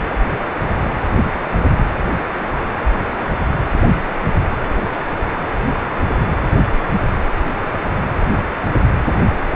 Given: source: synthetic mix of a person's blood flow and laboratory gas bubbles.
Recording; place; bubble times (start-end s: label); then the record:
Doppler ultrasound of blood flow; precordium
no bubbles
From the record:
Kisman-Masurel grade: 000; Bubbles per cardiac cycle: 0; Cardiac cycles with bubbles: 0%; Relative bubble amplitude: no bubbles discernible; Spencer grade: 0 (complete lack of bubble signals)